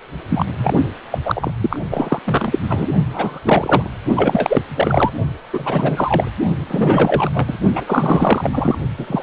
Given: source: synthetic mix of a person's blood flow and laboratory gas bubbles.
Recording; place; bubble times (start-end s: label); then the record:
Doppler ultrasound of blood flow; precordium
0.29-0.45 s: bubbles
0.57-0.73 s: bubbles
1.10-1.18 s: bubbles
1.25-1.51 s: bubbles
1.60-1.80 s: bubbles
1.90-2.19 s: bubbles
2.25-2.61 s: bubbles
2.68-2.88 s: bubbles
3.12-3.40 s: bubbles
3.44-3.90 s: bubbles
4.14-4.62 s: bubbles
4.71-5.11 s: bubbles
5.53-6.33 s: bubbles
6.68-7.29 s: bubbles
7.34-7.57 s: bubbles
7.75-7.84 s: bubbles
7.86-8.79 s: bubbles
8.98-9.23 s: bubbles
From the record:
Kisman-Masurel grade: 343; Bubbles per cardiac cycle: rolling drumbeat, 9 or more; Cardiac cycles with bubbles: 100%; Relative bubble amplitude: loud (0.450 to 0.775); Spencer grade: 3 (all of the cardiac periods contain showers or single bubble signals, but not dominating or overriding the cardiac motion signals); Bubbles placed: only in the low amplitude regions of the cardiac cycle